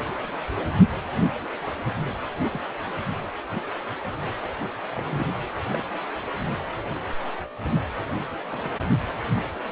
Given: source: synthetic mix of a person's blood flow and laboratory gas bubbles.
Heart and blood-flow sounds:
Doppler ultrasound of blood flow; precordium
2.50-2.61 s: bubbles
4.91-5.30 s: bubbles
5.73-5.83 s: bubbles
8.50-8.71 s: bubbles
From the record:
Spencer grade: 2 (many but less than half of the cardiac periods contain bubble signals, singularly or in groups); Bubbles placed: anywhere in the cardiac cycle

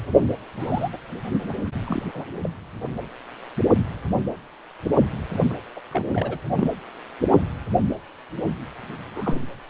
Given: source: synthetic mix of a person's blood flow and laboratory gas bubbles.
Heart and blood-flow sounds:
Doppler ultrasound of blood flow; precordium
0.59-0.90 s: bubbles
0.93-0.98 s: bubbles
1.49-1.53 s: bubbles
1.62-1.67 s: bubbles
1.85-2.02 s: bubbles
2.13-2.25 s: bubbles
2.43-2.50 s: bubbles
5.32-5.39 s: bubbles
5.50-5.57 s: bubbles
5.76-5.80 s: bubbles
5.91-6.06 s: bubbles
6.10-6.38 s: bubbles
6.57-6.71 s: bubbles
7.30-7.37 s: bubbles
9.15-9.46 s: bubbles
From the record:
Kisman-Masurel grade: 232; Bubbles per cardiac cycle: several, 3 to 8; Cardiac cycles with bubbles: 50 to 99%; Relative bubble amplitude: moderate (0.250 to 0.450); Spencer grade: 3 (all of the cardiac periods contain showers or single bubble signals, but not dominating or overriding the cardiac motion signals); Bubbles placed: anywhere in the cardiac cycle

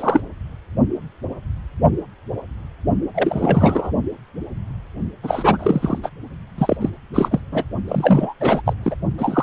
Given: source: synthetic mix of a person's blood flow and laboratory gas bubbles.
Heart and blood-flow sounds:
Doppler ultrasound of blood flow; precordium
0.00-0.22 s: bubbles
3.14-3.92 s: bubbles
5.23-5.99 s: bubbles
6.03-6.09 s: bubbles
6.58-6.76 s: bubbles
6.80-6.90 s: bubbles
7.13-7.29 s: bubbles
7.31-7.40 s: bubbles
7.52-7.64 s: bubbles
7.88-8.33 s: bubbles
8.40-8.62 s: bubbles
8.65-8.73 s: bubbles
8.82-8.95 s: bubbles
9.18-9.42 s: bubbles
From the record:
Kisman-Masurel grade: 333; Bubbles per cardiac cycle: rolling drumbeat, 9 or more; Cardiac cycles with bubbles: 50 to 99%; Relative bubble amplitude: loud (0.450 to 0.775); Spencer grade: 3 (all of the cardiac periods contain showers or single bubble signals, but not dominating or overriding the cardiac motion signals); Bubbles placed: only in the low amplitude regions of the cardiac cycle

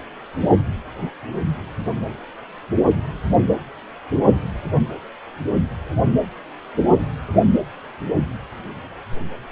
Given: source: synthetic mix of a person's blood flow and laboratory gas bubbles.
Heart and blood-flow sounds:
Doppler ultrasound of blood flow; precordium
no bubbles
From the record:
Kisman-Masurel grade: 000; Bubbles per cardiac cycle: 0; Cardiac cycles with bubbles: 0%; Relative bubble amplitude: no bubbles discernible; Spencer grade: 0 (complete lack of bubble signals)

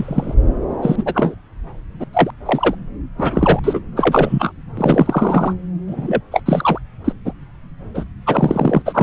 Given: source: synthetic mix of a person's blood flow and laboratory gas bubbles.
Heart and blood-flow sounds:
Doppler ultrasound of blood flow; subclavian vein
0.00-0.34 s: bubbles
0.82-1.35 s: bubbles
1.99-2.04 s: bubbles
2.13-2.30 s: bubbles
2.46-2.75 s: bubbles
3.17-3.59 s: bubbles
3.63-3.80 s: bubbles
3.96-4.52 s: bubbles
4.77-5.53 s: bubbles
5.87-6.21 s: bubbles
6.31-6.40 s: bubbles
6.46-6.79 s: bubbles
7.04-7.12 s: bubbles
7.25-7.33 s: bubbles
7.94-8.04 s: bubbles
8.26-8.82 s: bubbles
8.86-9.03 s: bubbles
From the record:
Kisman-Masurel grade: 243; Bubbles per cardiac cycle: several, 3 to 8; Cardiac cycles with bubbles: 100%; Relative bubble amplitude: loud (0.450 to 0.775); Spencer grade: 3 (all of the cardiac periods contain showers or single bubble signals, but not dominating or overriding the cardiac motion signals); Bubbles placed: anywhere in the cardiac cycle

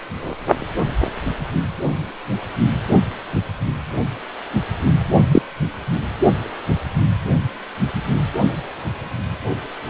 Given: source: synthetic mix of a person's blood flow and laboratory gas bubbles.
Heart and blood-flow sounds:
Doppler ultrasound of blood flow; precordium
5.32-5.42 s: bubbles
From the record:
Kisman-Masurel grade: 113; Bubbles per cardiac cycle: 1 to 2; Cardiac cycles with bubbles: 1 to 10%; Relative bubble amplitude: loud (0.450 to 0.775); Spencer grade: 1 (occasional bubble signal discernible with the cardiac motion signal, with majority of cardiac periods free of bubbles); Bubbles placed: only in the low amplitude regions of the cardiac cycle

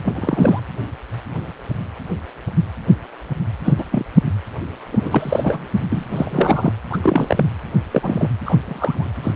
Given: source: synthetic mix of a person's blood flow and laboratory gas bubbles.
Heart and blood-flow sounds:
Doppler ultrasound of blood flow; precordium
0.05-0.60 s: bubbles
3.64-3.75 s: bubbles
3.77-3.85 s: bubbles
3.91-4.05 s: bubbles
4.92-5.66 s: bubbles
5.90-6.71 s: bubbles
6.90-6.98 s: bubbles
7.03-7.46 s: bubbles
7.91-8.29 s: bubbles
8.46-8.57 s: bubbles
8.65-9.11 s: bubbles
9.22-9.32 s: bubbles
From the record:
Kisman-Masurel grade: 232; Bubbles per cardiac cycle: several, 3 to 8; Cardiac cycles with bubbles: 50 to 99%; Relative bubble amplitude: moderate (0.250 to 0.450); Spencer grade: 3 (all of the cardiac periods contain showers or single bubble signals, but not dominating or overriding the cardiac motion signals); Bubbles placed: anywhere in the cardiac cycle

